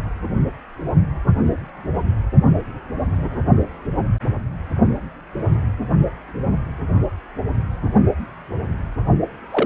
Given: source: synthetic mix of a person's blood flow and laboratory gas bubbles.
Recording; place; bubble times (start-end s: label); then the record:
Doppler ultrasound of blood flow; precordium
9.51-9.66 s: bubbles
From the record:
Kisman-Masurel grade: 112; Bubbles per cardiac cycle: 1 to 2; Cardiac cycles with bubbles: 1 to 10%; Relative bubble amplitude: moderate (0.250 to 0.450); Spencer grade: 1 (occasional bubble signal discernible with the cardiac motion signal, with majority of cardiac periods free of bubbles); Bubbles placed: only in the low amplitude regions of the cardiac cycle